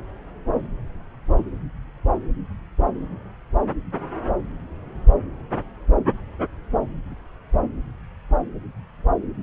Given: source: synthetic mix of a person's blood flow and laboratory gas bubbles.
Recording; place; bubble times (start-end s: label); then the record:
Doppler ultrasound of blood flow; subclavian vein
no bubbles
From the record:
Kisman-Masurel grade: 000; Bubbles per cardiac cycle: 0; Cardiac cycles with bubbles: 0%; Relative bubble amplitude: no bubbles discernible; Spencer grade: 0 (complete lack of bubble signals)